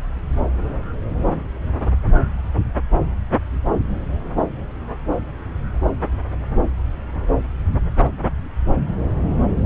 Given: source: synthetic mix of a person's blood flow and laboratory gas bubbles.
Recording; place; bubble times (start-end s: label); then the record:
Doppler ultrasound of blood flow; subclavian vein
no bubbles
From the record:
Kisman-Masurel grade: 000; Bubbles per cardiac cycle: 0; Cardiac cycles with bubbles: 0%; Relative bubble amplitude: no bubbles discernible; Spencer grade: 0 (complete lack of bubble signals)